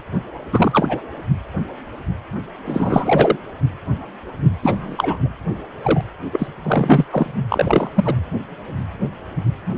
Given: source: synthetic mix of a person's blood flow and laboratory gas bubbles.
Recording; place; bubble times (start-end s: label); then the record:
Doppler ultrasound of blood flow; precordium
0.51-1.04 s: bubbles
2.65-3.37 s: bubbles
4.62-5.29 s: bubbles
5.83-6.01 s: bubbles
6.32-6.48 s: bubbles
6.62-7.05 s: bubbles
7.12-7.29 s: bubbles
7.50-7.91 s: bubbles
7.96-8.15 s: bubbles
From the record:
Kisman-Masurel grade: 223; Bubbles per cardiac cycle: several, 3 to 8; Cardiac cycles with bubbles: 10 to 50%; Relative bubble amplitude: loud (0.450 to 0.775); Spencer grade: 2 (many but less than half of the cardiac periods contain bubble signals, singularly or in groups); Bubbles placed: anywhere in the cardiac cycle